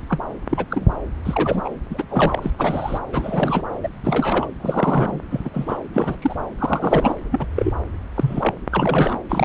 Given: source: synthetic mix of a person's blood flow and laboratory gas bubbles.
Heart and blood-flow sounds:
Doppler ultrasound of blood flow; subclavian vein
0.09-0.20 s: bubbles
0.49-0.66 s: bubbles
0.71-0.86 s: bubbles
1.25-1.69 s: bubbles
1.90-2.51 s: bubbles
2.58-2.99 s: bubbles
3.12-3.62 s: bubbles
3.83-3.89 s: bubbles
4.03-4.48 s: bubbles
4.59-5.19 s: bubbles
5.30-5.49 s: bubbles
5.53-5.76 s: bubbles
5.93-6.16 s: bubbles
6.21-6.34 s: bubbles
6.57-7.14 s: bubbles
7.31-7.46 s: bubbles
7.56-7.70 s: bubbles
8.14-8.54 s: bubbles
8.70-9.19 s: bubbles
9.29-9.45 s: bubbles
From the record:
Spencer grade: 3 (all of the cardiac periods contain showers or single bubble signals, but not dominating or overriding the cardiac motion signals); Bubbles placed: anywhere in the cardiac cycle

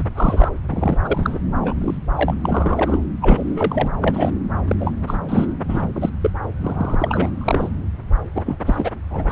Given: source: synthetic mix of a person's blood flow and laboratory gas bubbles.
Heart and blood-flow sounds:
Doppler ultrasound of blood flow; subclavian vein
0.00-0.05 s: bubbles
0.15-0.49 s: bubbles
0.70-0.98 s: bubbles
1.04-1.39 s: bubbles
1.61-1.75 s: bubbles
1.81-1.98 s: bubbles
2.15-2.35 s: bubbles
2.43-3.05 s: bubbles
3.21-3.88 s: bubbles
4.01-4.31 s: bubbles
4.67-4.75 s: bubbles
4.80-4.94 s: bubbles
5.07-5.17 s: bubbles
5.29-5.46 s: bubbles
5.68-5.82 s: bubbles
5.95-6.09 s: bubbles
6.21-6.30 s: bubbles
6.61-7.30 s: bubbles
7.37-7.70 s: bubbles
8.35-8.59 s: bubbles
8.66-8.90 s: bubbles
9.10-9.32 s: bubbles
From the record:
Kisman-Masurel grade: 242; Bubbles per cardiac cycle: several, 3 to 8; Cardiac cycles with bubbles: 100%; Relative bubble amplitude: moderate (0.250 to 0.450); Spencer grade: 3 (all of the cardiac periods contain showers or single bubble signals, but not dominating or overriding the cardiac motion signals); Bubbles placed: anywhere in the cardiac cycle

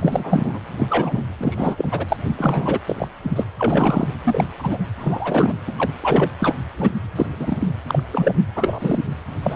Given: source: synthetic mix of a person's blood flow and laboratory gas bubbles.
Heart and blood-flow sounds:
Doppler ultrasound of blood flow; precordium
0.00-0.59 s: bubbles
0.79-1.24 s: bubbles
1.38-1.75 s: bubbles
1.78-2.06 s: bubbles
2.08-2.17 s: bubbles
2.27-2.34 s: bubbles
2.38-2.78 s: bubbles
2.87-3.07 s: bubbles
3.23-3.44 s: bubbles
3.59-4.08 s: bubbles
4.24-4.45 s: bubbles
4.58-4.78 s: bubbles
4.98-5.54 s: bubbles
5.67-5.72 s: bubbles
5.77-5.90 s: bubbles
6.02-6.31 s: bubbles
6.40-6.55 s: bubbles
6.77-6.91 s: bubbles
7.16-7.26 s: bubbles
7.39-7.72 s: bubbles
7.88-8.03 s: bubbles
8.12-8.32 s: bubbles
8.55-8.99 s: bubbles
9.42-9.56 s: bubbles
From the record:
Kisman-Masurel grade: 242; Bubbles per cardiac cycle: several, 3 to 8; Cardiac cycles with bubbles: 100%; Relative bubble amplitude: moderate (0.250 to 0.450); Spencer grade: 3 (all of the cardiac periods contain showers or single bubble signals, but not dominating or overriding the cardiac motion signals); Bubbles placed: anywhere in the cardiac cycle

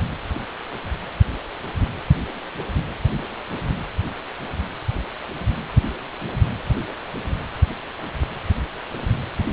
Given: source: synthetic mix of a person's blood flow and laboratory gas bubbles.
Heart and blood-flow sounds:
Doppler ultrasound of blood flow; precordium
no bubbles
From the record:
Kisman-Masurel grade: 000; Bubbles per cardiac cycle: 0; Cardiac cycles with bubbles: 0%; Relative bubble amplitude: no bubbles discernible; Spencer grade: 0 (complete lack of bubble signals)

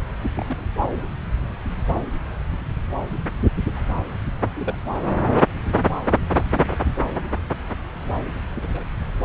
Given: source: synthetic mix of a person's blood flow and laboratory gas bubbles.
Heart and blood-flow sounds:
Doppler ultrasound of blood flow; subclavian vein
0.37-0.67 s: bubbles
3.76-3.81 s: bubbles
4.54-4.75 s: bubbles
6.49-6.71 s: bubbles
8.55-8.84 s: bubbles
From the record:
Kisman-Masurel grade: 121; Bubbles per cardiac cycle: 1 to 2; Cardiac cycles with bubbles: 10 to 50%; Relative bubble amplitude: barely perceptible (0.100 to 0.250); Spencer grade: 2 (many but less than half of the cardiac periods contain bubble signals, singularly or in groups); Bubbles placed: anywhere in the cardiac cycle

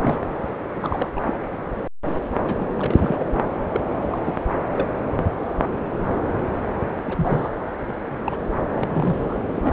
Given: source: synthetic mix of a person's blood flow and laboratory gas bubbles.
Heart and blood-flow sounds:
Doppler ultrasound of blood flow; subclavian vein
0.02-0.18 s: bubbles
0.74-1.10 s: bubbles
1.16-1.33 s: bubbles
2.42-3.25 s: bubbles
3.72-3.81 s: bubbles
4.02-4.19 s: bubbles
4.25-4.42 s: bubbles
4.72-4.88 s: bubbles
7.04-7.50 s: bubbles
7.87-7.94 s: bubbles
8.10-8.37 s: bubbles
8.75-9.36 s: bubbles
9.55-9.72 s: bubbles
From the record:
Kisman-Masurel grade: 232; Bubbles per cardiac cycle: several, 3 to 8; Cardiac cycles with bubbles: 50 to 99%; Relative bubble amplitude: moderate (0.250 to 0.450); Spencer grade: 3 (all of the cardiac periods contain showers or single bubble signals, but not dominating or overriding the cardiac motion signals); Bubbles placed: anywhere in the cardiac cycle

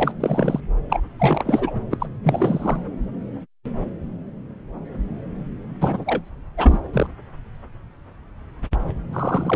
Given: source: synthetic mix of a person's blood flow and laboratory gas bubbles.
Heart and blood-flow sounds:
Doppler ultrasound of blood flow; subclavian vein
0.00-0.12 s: bubbles
0.20-0.60 s: bubbles
0.90-1.02 s: bubbles
1.20-1.72 s: bubbles
1.91-1.97 s: bubbles
2.00-2.06 s: bubbles
2.23-2.81 s: bubbles
5.81-6.21 s: bubbles
6.57-6.79 s: bubbles
6.93-7.07 s: bubbles
9.12-9.56 s: bubbles
From the record:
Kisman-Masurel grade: 332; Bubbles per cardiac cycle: rolling drumbeat, 9 or more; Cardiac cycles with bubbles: 50 to 99%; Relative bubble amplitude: moderate (0.250 to 0.450); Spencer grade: 3 (all of the cardiac periods contain showers or single bubble signals, but not dominating or overriding the cardiac motion signals); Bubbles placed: anywhere in the cardiac cycle

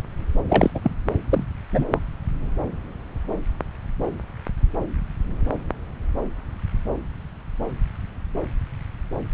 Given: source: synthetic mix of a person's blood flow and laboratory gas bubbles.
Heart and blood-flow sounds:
Doppler ultrasound of blood flow; subclavian vein
0.49-0.70 s: bubbles
0.75-0.80 s: bubbles
0.83-0.95 s: bubbles
1.30-1.46 s: bubbles
1.71-1.85 s: bubbles
1.92-1.99 s: bubbles
From the record:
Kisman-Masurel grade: 212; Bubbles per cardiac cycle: several, 3 to 8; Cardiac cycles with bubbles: 1 to 10%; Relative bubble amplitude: moderate (0.250 to 0.450); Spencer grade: 1 (occasional bubble signal discernible with the cardiac motion signal, with majority of cardiac periods free of bubbles); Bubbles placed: anywhere in the cardiac cycle

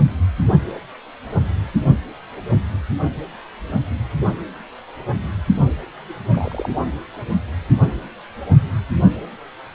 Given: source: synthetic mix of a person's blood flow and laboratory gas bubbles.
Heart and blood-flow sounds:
Doppler ultrasound of blood flow; precordium
6.31-6.71 s: bubbles
6.75-6.83 s: bubbles
From the record:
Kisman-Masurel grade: 211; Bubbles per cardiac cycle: several, 3 to 8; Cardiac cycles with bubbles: 1 to 10%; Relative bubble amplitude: barely perceptible (0.100 to 0.250); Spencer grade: 1 (occasional bubble signal discernible with the cardiac motion signal, with majority of cardiac periods free of bubbles); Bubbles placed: anywhere in the cardiac cycle

